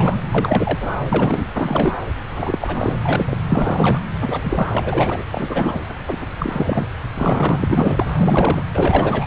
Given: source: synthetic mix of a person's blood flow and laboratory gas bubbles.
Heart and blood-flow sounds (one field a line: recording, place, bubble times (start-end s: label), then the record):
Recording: Doppler ultrasound of blood flow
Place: subclavian vein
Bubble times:
0.00-0.19 s: bubbles
0.32-0.93 s: bubbles
1.11-1.47 s: bubbles
1.54-1.93 s: bubbles
2.32-2.94 s: bubbles
3.04-3.38 s: bubbles
3.49-4.01 s: bubbles
4.20-4.70 s: bubbles
4.72-5.23 s: bubbles
5.32-5.81 s: bubbles
6.07-6.17 s: bubbles
6.21-6.26 s: bubbles
6.38-6.88 s: bubbles
7.14-8.06 s: bubbles
8.15-8.63 s: bubbles
8.74-9.26 s: bubbles
From the record:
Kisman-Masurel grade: 343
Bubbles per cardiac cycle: rolling drumbeat, 9 or more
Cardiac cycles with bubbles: 100%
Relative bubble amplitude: loud (0.450 to 0.775)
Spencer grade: 3 (all of the cardiac periods contain showers or single bubble signals, but not dominating or overriding the cardiac motion signals)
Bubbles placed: anywhere in the cardiac cycle